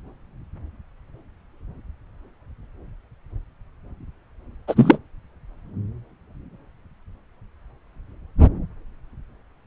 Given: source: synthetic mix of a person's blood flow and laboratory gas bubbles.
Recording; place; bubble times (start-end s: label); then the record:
Doppler ultrasound of blood flow; subclavian vein
4.68-4.99 s: bubbles
From the record:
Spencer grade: 1 (occasional bubble signal discernible with the cardiac motion signal, with majority of cardiac periods free of bubbles); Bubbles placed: anywhere in the cardiac cycle